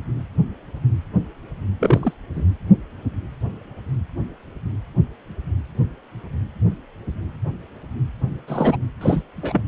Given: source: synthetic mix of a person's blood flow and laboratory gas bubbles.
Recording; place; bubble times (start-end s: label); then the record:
Doppler ultrasound of blood flow; precordium
1.80-2.14 s: bubbles
2.33-2.44 s: bubbles
8.47-8.77 s: bubbles
9.01-9.22 s: bubbles
9.37-9.62 s: bubbles
From the record:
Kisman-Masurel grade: 222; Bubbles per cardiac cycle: several, 3 to 8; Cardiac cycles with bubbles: 10 to 50%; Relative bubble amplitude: moderate (0.250 to 0.450); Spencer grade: 2 (many but less than half of the cardiac periods contain bubble signals, singularly or in groups); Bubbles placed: anywhere in the cardiac cycle